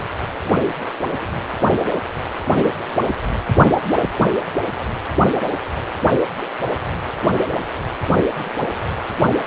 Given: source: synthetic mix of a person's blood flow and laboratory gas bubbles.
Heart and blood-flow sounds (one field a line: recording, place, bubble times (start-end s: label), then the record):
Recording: Doppler ultrasound of blood flow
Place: precordium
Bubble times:
no bubbles
From the record:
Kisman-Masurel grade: 000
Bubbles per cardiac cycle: 0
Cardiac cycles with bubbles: 0%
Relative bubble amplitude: no bubbles discernible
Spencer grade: 0 (complete lack of bubble signals)